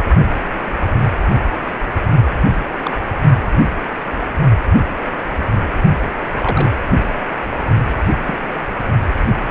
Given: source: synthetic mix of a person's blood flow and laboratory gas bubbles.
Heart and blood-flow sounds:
Doppler ultrasound of blood flow; precordium
2.83-2.91 s: bubbles
6.37-6.80 s: bubbles
8.27-8.38 s: bubbles
From the record:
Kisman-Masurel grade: 122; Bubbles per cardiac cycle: 1 to 2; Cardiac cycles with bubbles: 10 to 50%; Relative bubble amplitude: moderate (0.250 to 0.450); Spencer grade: 2 (many but less than half of the cardiac periods contain bubble signals, singularly or in groups); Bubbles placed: only in the low amplitude regions of the cardiac cycle

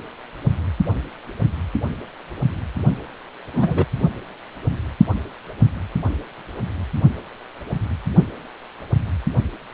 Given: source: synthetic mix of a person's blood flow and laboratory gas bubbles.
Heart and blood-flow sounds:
Doppler ultrasound of blood flow; precordium
3.54-3.85 s: bubbles
From the record:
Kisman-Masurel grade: 112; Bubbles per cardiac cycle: 1 to 2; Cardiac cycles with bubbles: 1 to 10%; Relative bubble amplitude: moderate (0.250 to 0.450); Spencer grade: 1 (occasional bubble signal discernible with the cardiac motion signal, with majority of cardiac periods free of bubbles); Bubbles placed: only in the low amplitude regions of the cardiac cycle

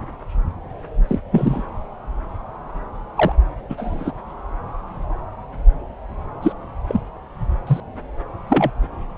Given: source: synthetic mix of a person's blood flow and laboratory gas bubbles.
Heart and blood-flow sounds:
Doppler ultrasound of blood flow; subclavian vein
1.07-1.19 s: bubbles
1.31-1.62 s: bubbles
3.16-3.32 s: bubbles
3.69-4.11 s: bubbles
6.42-6.52 s: bubbles
6.88-7.00 s: bubbles
7.67-7.80 s: bubbles
8.49-8.71 s: bubbles
From the record:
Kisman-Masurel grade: 123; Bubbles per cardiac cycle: 1 to 2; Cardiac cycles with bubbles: 10 to 50%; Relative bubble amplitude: loud (0.450 to 0.775); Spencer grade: 2 (many but less than half of the cardiac periods contain bubble signals, singularly or in groups); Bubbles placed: anywhere in the cardiac cycle

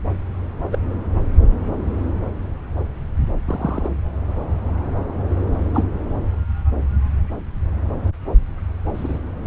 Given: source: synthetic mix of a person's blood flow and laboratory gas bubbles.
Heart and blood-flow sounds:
Doppler ultrasound of blood flow; subclavian vein
0.72-0.78 s: bubbles
3.45-3.92 s: bubbles
5.74-5.85 s: bubbles
8.94-9.19 s: bubbles
From the record:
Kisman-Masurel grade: 122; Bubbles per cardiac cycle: 1 to 2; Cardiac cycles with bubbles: 10 to 50%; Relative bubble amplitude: moderate (0.250 to 0.450); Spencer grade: 2 (many but less than half of the cardiac periods contain bubble signals, singularly or in groups); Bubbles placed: anywhere in the cardiac cycle

